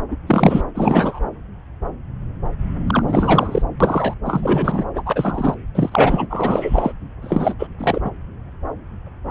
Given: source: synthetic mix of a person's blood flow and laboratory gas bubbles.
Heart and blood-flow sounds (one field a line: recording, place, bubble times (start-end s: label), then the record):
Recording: Doppler ultrasound of blood flow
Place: subclavian vein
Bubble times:
0.10-0.16 s: bubbles
0.27-0.63 s: bubbles
0.74-1.20 s: bubbles
2.87-3.03 s: bubbles
3.08-3.62 s: bubbles
3.80-4.15 s: bubbles
4.25-4.84 s: bubbles
4.95-5.03 s: bubbles
5.05-5.55 s: bubbles
5.75-6.26 s: bubbles
6.29-6.93 s: bubbles
7.21-7.54 s: bubbles
7.58-7.67 s: bubbles
7.78-8.02 s: bubbles
8.04-8.11 s: bubbles
From the record:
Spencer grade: 3 (all of the cardiac periods contain showers or single bubble signals, but not dominating or overriding the cardiac motion signals)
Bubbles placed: anywhere in the cardiac cycle